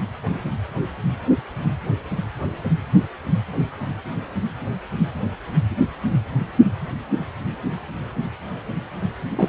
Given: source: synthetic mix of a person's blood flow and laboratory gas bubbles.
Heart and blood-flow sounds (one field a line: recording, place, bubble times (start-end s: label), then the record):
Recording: Doppler ultrasound of blood flow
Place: precordium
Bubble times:
9.31-9.49 s: bubbles
From the record:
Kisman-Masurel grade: 212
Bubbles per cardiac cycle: several, 3 to 8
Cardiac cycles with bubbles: 1 to 10%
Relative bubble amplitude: moderate (0.250 to 0.450)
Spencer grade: 1 (occasional bubble signal discernible with the cardiac motion signal, with majority of cardiac periods free of bubbles)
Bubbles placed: anywhere in the cardiac cycle